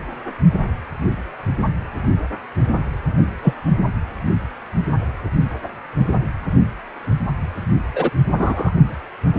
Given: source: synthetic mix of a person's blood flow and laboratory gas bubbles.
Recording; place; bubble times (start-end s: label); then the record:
Doppler ultrasound of blood flow; precordium
3.42-3.54 s: bubbles
7.95-8.10 s: bubbles
8.38-8.71 s: bubbles
From the record:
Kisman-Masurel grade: 123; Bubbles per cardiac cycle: 1 to 2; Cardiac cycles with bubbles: 10 to 50%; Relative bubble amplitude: loud (0.450 to 0.775); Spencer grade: 2 (many but less than half of the cardiac periods contain bubble signals, singularly or in groups); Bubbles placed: only in the low amplitude regions of the cardiac cycle